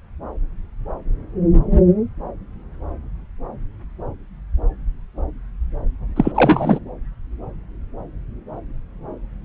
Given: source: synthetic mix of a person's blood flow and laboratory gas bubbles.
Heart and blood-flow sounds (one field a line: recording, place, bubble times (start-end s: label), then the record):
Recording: Doppler ultrasound of blood flow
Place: subclavian vein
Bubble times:
6.16-6.32 s: bubbles
6.34-6.79 s: bubbles
From the record:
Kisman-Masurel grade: 213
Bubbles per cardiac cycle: several, 3 to 8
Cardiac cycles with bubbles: 1 to 10%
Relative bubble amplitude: loud (0.450 to 0.775)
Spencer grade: 1 (occasional bubble signal discernible with the cardiac motion signal, with majority of cardiac periods free of bubbles)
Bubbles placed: anywhere in the cardiac cycle